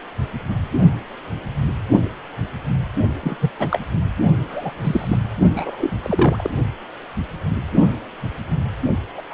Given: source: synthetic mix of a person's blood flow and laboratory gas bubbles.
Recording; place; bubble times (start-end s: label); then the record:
Doppler ultrasound of blood flow; precordium
3.23-3.37 s: bubbles
3.41-3.51 s: bubbles
3.59-3.67 s: bubbles
3.71-3.79 s: bubbles
4.50-4.70 s: bubbles
4.81-5.17 s: bubbles
5.54-5.90 s: bubbles
6.02-6.50 s: bubbles
9.17-9.22 s: bubbles
9.30-9.34 s: bubbles
From the record:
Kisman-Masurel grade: 222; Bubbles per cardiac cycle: several, 3 to 8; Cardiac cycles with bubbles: 10 to 50%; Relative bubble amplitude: moderate (0.250 to 0.450); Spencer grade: 2 (many but less than half of the cardiac periods contain bubble signals, singularly or in groups); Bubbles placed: only in the low amplitude regions of the cardiac cycle